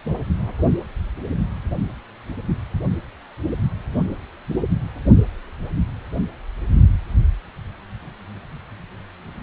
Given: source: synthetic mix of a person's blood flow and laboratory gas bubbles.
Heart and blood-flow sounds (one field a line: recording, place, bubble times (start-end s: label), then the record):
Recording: Doppler ultrasound of blood flow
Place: precordium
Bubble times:
2.48-2.54 s: bubbles
From the record:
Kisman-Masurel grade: 111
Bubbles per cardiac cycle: 1 to 2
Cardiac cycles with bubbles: 1 to 10%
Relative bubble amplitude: barely perceptible (0.100 to 0.250)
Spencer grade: 1 (occasional bubble signal discernible with the cardiac motion signal, with majority of cardiac periods free of bubbles)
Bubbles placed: anywhere in the cardiac cycle